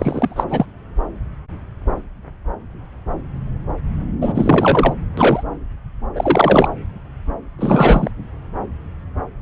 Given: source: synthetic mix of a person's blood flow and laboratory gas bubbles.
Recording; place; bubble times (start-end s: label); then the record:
Doppler ultrasound of blood flow; subclavian vein
0.00-0.44 s: bubbles
0.49-0.66 s: bubbles
4.21-4.93 s: bubbles
5.17-5.43 s: bubbles
6.15-6.68 s: bubbles
7.58-8.11 s: bubbles
From the record:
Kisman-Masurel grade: 223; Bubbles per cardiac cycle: several, 3 to 8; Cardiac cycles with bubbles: 10 to 50%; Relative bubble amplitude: loud (0.450 to 0.775); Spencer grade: 2 (many but less than half of the cardiac periods contain bubble signals, singularly or in groups); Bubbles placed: anywhere in the cardiac cycle